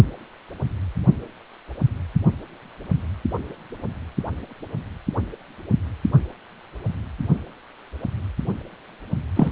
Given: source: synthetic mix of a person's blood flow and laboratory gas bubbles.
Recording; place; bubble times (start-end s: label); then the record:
Doppler ultrasound of blood flow; precordium
9.36-9.52 s: bubbles
From the record:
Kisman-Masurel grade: 213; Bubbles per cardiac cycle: several, 3 to 8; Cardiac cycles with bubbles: 1 to 10%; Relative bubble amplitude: loud (0.450 to 0.775); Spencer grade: 1 (occasional bubble signal discernible with the cardiac motion signal, with majority of cardiac periods free of bubbles); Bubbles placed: anywhere in the cardiac cycle